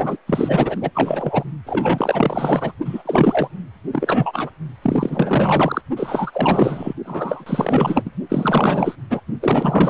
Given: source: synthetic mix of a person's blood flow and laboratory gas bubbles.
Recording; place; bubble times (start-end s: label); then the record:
Doppler ultrasound of blood flow; precordium
0.00-0.17 s: bubbles
0.27-0.78 s: bubbles
0.80-0.91 s: bubbles
0.94-1.44 s: bubbles
1.66-2.72 s: bubbles
2.85-3.03 s: bubbles
3.05-3.49 s: bubbles
3.93-4.50 s: bubbles
4.82-5.82 s: bubbles
5.96-6.93 s: bubbles
7.05-8.11 s: bubbles
8.29-8.96 s: bubbles
9.10-9.20 s: bubbles
9.41-9.90 s: bubbles
From the record:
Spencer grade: 4 (maximum detectable bubble signal sounding continuously throughout systole and diastole of every cardiac period, and overriding the amplitude of the normal cardiac signals); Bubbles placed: only in the low amplitude regions of the cardiac cycle